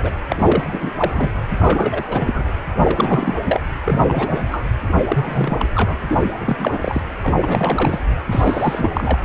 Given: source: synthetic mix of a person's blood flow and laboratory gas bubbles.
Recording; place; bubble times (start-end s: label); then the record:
Doppler ultrasound of blood flow; precordium
0.00-0.10 s: bubbles
0.28-1.30 s: bubbles
1.59-2.04 s: bubbles
2.07-2.44 s: bubbles
2.79-3.40 s: bubbles
3.45-3.60 s: bubbles
3.85-4.64 s: bubbles
5.08-5.65 s: bubbles
5.75-5.96 s: bubbles
6.07-6.26 s: bubbles
6.38-7.01 s: bubbles
7.22-8.01 s: bubbles
8.30-8.90 s: bubbles
8.93-9.19 s: bubbles
From the record:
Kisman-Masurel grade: 342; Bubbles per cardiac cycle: rolling drumbeat, 9 or more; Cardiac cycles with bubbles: 100%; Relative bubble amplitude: moderate (0.250 to 0.450); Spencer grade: 3 (all of the cardiac periods contain showers or single bubble signals, but not dominating or overriding the cardiac motion signals); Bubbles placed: anywhere in the cardiac cycle